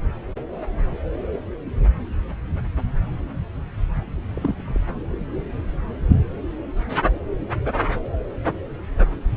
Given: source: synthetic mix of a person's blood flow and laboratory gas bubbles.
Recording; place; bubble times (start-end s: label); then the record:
Doppler ultrasound of blood flow; subclavian vein
4.33-4.81 s: bubbles
From the record:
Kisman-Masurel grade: 122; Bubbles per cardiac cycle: 1 to 2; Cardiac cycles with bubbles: 10 to 50%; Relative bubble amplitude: moderate (0.250 to 0.450); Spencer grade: 2 (many but less than half of the cardiac periods contain bubble signals, singularly or in groups); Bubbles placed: anywhere in the cardiac cycle